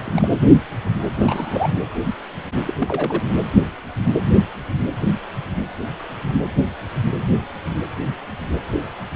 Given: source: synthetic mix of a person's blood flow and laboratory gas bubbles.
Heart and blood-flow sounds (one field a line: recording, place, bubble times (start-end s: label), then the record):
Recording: Doppler ultrasound of blood flow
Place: precordium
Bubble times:
0.00-0.02 s: bubbles
0.05-0.27 s: bubbles
1.19-1.72 s: bubbles
2.65-2.73 s: bubbles
2.78-3.23 s: bubbles
From the record:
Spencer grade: 2 (many but less than half of the cardiac periods contain bubble signals, singularly or in groups)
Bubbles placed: anywhere in the cardiac cycle